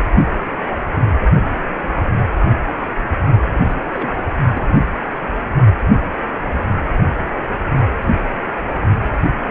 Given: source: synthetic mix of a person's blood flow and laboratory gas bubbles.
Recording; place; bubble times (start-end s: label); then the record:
Doppler ultrasound of blood flow; precordium
3.49-4.11 s: bubbles
4.14-4.23 s: bubbles
4.54-4.66 s: bubbles
From the record:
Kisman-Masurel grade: 221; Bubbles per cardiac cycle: several, 3 to 8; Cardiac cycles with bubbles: 10 to 50%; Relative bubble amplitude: barely perceptible (0.100 to 0.250); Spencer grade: 2 (many but less than half of the cardiac periods contain bubble signals, singularly or in groups); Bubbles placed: only in the low amplitude regions of the cardiac cycle